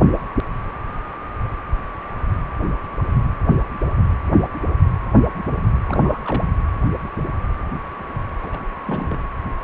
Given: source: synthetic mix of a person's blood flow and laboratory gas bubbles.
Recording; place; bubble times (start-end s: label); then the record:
Doppler ultrasound of blood flow; precordium
5.85-6.21 s: bubbles
6.24-6.43 s: bubbles
8.42-8.62 s: bubbles
8.85-9.20 s: bubbles
From the record:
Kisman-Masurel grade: 211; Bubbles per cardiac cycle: several, 3 to 8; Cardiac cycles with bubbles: 1 to 10%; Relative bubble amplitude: barely perceptible (0.100 to 0.250); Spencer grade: 1 (occasional bubble signal discernible with the cardiac motion signal, with majority of cardiac periods free of bubbles); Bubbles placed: anywhere in the cardiac cycle